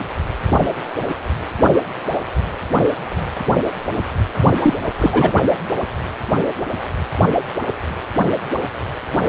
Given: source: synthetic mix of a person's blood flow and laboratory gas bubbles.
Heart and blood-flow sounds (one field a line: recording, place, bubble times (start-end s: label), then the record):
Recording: Doppler ultrasound of blood flow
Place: precordium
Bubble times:
4.62-4.74 s: bubbles
4.98-5.33 s: bubbles
From the record:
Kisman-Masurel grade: 213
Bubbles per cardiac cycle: several, 3 to 8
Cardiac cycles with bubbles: 1 to 10%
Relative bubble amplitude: loud (0.450 to 0.775)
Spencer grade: 1 (occasional bubble signal discernible with the cardiac motion signal, with majority of cardiac periods free of bubbles)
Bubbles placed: only in the low amplitude regions of the cardiac cycle